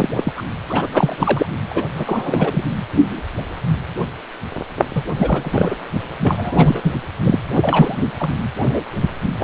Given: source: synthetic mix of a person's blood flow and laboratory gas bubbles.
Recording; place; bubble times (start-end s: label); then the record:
Doppler ultrasound of blood flow; precordium
0.00-0.09 s: bubbles
0.15-0.33 s: bubbles
0.37-0.42 s: bubbles
0.69-0.88 s: bubbles
0.93-1.46 s: bubbles
1.69-1.83 s: bubbles
1.94-2.63 s: bubbles
4.95-5.04 s: bubbles
5.16-5.76 s: bubbles
6.20-6.92 s: bubbles
7.21-7.37 s: bubbles
7.55-8.12 s: bubbles
8.20-8.30 s: bubbles
9.39-9.44 s: bubbles
From the record:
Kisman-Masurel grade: 333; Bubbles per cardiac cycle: rolling drumbeat, 9 or more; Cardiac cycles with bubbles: 50 to 99%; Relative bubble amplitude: loud (0.450 to 0.775); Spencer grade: 3 (all of the cardiac periods contain showers or single bubble signals, but not dominating or overriding the cardiac motion signals); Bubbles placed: anywhere in the cardiac cycle